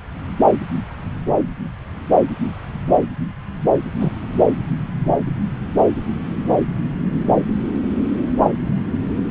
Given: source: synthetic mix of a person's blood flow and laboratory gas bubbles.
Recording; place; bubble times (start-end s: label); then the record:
Doppler ultrasound of blood flow; subclavian vein
4.00-4.12 s: bubbles
From the record:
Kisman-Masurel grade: 113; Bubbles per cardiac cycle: 1 to 2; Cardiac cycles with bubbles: 1 to 10%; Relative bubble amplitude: loud (0.450 to 0.775); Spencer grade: 1 (occasional bubble signal discernible with the cardiac motion signal, with majority of cardiac periods free of bubbles); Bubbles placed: anywhere in the cardiac cycle